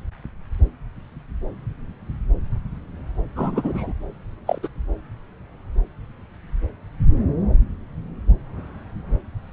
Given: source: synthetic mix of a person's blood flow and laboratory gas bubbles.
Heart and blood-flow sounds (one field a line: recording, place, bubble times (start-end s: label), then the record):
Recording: Doppler ultrasound of blood flow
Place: subclavian vein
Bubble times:
3.35-3.92 s: bubbles
4.47-4.58 s: bubbles
4.62-4.68 s: bubbles
From the record:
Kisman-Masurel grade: 113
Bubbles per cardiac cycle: 1 to 2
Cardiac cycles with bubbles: 1 to 10%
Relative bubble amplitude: loud (0.450 to 0.775)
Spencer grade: 1 (occasional bubble signal discernible with the cardiac motion signal, with majority of cardiac periods free of bubbles)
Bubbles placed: anywhere in the cardiac cycle